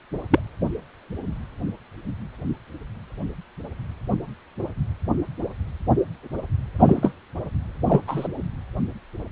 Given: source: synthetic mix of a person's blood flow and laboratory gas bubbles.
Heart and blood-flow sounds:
Doppler ultrasound of blood flow; precordium
0.31-0.39 s: bubbles
6.79-7.13 s: bubbles
7.87-8.01 s: bubbles
8.07-8.28 s: bubbles
From the record:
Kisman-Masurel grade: 123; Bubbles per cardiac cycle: 1 to 2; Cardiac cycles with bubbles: 10 to 50%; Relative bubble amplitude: loud (0.450 to 0.775); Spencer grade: 2 (many but less than half of the cardiac periods contain bubble signals, singularly or in groups); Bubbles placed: anywhere in the cardiac cycle

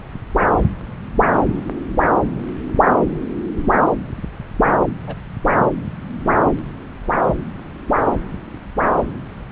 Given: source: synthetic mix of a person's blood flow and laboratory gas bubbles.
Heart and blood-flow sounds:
Doppler ultrasound of blood flow; subclavian vein
5.06-5.16 s: bubbles
From the record:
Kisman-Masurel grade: 111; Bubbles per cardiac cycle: 1 to 2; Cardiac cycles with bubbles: 1 to 10%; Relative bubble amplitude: barely perceptible (0.100 to 0.250); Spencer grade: 1 (occasional bubble signal discernible with the cardiac motion signal, with majority of cardiac periods free of bubbles); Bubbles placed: anywhere in the cardiac cycle

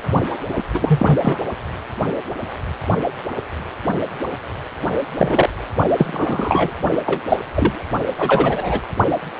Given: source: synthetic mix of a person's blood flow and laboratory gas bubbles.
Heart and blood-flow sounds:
Doppler ultrasound of blood flow; precordium
0.49-0.64 s: bubbles
0.74-1.18 s: bubbles
1.21-1.38 s: bubbles
5.18-5.49 s: bubbles
5.96-6.71 s: bubbles
7.06-7.21 s: bubbles
7.28-7.37 s: bubbles
7.52-7.91 s: bubbles
8.17-8.79 s: bubbles
From the record:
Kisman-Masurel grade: 233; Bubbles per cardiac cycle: several, 3 to 8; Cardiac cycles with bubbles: 50 to 99%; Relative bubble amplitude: loud (0.450 to 0.775); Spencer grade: 3 (all of the cardiac periods contain showers or single bubble signals, but not dominating or overriding the cardiac motion signals); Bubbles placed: only in the low amplitude regions of the cardiac cycle

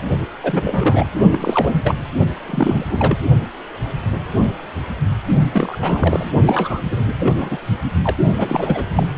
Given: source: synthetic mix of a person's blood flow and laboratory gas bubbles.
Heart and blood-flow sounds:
Doppler ultrasound of blood flow; precordium
0.43-1.07 s: bubbles
1.30-1.94 s: bubbles
2.46-3.19 s: bubbles
5.52-6.32 s: bubbles
6.46-6.80 s: bubbles
6.90-6.96 s: bubbles
7.16-7.57 s: bubbles
8.03-8.16 s: bubbles
8.38-8.86 s: bubbles
8.95-9.06 s: bubbles
From the record:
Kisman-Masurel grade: 332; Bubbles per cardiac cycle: rolling drumbeat, 9 or more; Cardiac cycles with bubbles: 50 to 99%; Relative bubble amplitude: moderate (0.250 to 0.450); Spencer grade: 3 (all of the cardiac periods contain showers or single bubble signals, but not dominating or overriding the cardiac motion signals); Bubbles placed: only in the low amplitude regions of the cardiac cycle

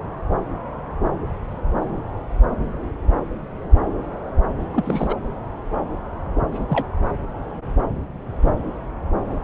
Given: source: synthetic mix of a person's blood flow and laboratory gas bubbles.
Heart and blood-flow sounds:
Doppler ultrasound of blood flow; subclavian vein
4.73-5.17 s: bubbles
6.52-6.65 s: bubbles
6.69-6.85 s: bubbles
From the record:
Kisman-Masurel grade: 212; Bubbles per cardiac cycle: several, 3 to 8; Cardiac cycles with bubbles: 1 to 10%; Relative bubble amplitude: moderate (0.250 to 0.450); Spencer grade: 1 (occasional bubble signal discernible with the cardiac motion signal, with majority of cardiac periods free of bubbles); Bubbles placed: anywhere in the cardiac cycle

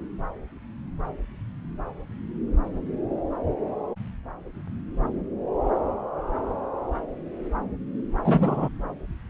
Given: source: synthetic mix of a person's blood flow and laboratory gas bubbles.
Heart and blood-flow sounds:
Doppler ultrasound of blood flow; subclavian vein
8.24-8.69 s: bubbles
From the record:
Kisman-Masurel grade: 113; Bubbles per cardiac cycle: 1 to 2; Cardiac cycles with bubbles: 1 to 10%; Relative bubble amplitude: loud (0.450 to 0.775); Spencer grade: 1 (occasional bubble signal discernible with the cardiac motion signal, with majority of cardiac periods free of bubbles); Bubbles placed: anywhere in the cardiac cycle

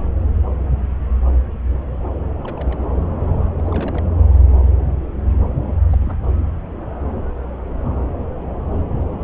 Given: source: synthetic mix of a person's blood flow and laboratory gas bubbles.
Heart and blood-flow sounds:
Doppler ultrasound of blood flow; subclavian vein
2.45-2.80 s: bubbles
3.58-4.05 s: bubbles
5.90-6.17 s: bubbles
From the record:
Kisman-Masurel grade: 221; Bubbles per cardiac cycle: several, 3 to 8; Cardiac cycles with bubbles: 10 to 50%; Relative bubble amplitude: barely perceptible (0.100 to 0.250); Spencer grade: 2 (many but less than half of the cardiac periods contain bubble signals, singularly or in groups); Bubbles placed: anywhere in the cardiac cycle

